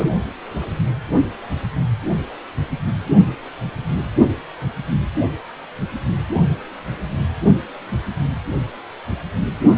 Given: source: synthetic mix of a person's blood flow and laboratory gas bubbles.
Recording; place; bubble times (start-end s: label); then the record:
Doppler ultrasound of blood flow; precordium
0.00-0.10 s: bubbles
From the record:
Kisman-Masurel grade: 112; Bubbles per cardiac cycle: 1 to 2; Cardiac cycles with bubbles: 1 to 10%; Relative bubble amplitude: moderate (0.250 to 0.450); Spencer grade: 1 (occasional bubble signal discernible with the cardiac motion signal, with majority of cardiac periods free of bubbles); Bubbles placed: only in the low amplitude regions of the cardiac cycle